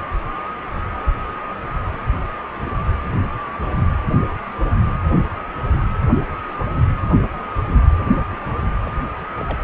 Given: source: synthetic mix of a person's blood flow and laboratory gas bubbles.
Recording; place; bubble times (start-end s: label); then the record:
Doppler ultrasound of blood flow; precordium
8.85-8.92 s: bubbles
9.37-9.58 s: bubbles
From the record:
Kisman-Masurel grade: 211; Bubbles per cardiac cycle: several, 3 to 8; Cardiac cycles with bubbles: 1 to 10%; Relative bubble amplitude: barely perceptible (0.100 to 0.250); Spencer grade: 1 (occasional bubble signal discernible with the cardiac motion signal, with majority of cardiac periods free of bubbles); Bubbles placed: anywhere in the cardiac cycle